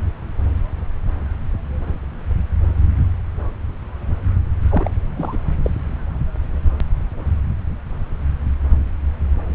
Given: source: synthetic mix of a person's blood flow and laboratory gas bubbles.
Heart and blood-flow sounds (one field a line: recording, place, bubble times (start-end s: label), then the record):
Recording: Doppler ultrasound of blood flow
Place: subclavian vein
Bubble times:
4.70-4.91 s: bubbles
5.17-5.38 s: bubbles
5.62-5.70 s: bubbles
From the record:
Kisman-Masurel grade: 222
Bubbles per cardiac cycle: several, 3 to 8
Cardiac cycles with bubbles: 10 to 50%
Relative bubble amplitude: moderate (0.250 to 0.450)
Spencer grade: 2 (many but less than half of the cardiac periods contain bubble signals, singularly or in groups)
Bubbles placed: anywhere in the cardiac cycle